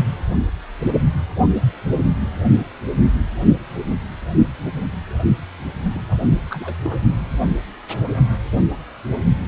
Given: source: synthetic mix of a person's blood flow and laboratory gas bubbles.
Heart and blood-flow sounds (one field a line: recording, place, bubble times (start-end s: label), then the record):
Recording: Doppler ultrasound of blood flow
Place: precordium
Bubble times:
5.93-6.00 s: bubbles
6.08-6.14 s: bubbles
6.50-6.75 s: bubbles
6.82-6.98 s: bubbles
From the record:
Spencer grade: 1 (occasional bubble signal discernible with the cardiac motion signal, with majority of cardiac periods free of bubbles)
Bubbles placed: only in the low amplitude regions of the cardiac cycle